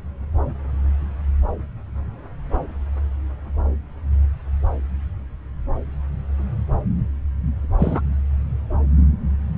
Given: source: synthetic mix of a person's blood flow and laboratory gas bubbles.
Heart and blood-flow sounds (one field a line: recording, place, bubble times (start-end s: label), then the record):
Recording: Doppler ultrasound of blood flow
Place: subclavian vein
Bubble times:
7.79-8.01 s: bubbles
From the record:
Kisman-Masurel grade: 113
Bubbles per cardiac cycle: 1 to 2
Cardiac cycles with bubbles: 1 to 10%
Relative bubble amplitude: loud (0.450 to 0.775)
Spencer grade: 1 (occasional bubble signal discernible with the cardiac motion signal, with majority of cardiac periods free of bubbles)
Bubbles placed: anywhere in the cardiac cycle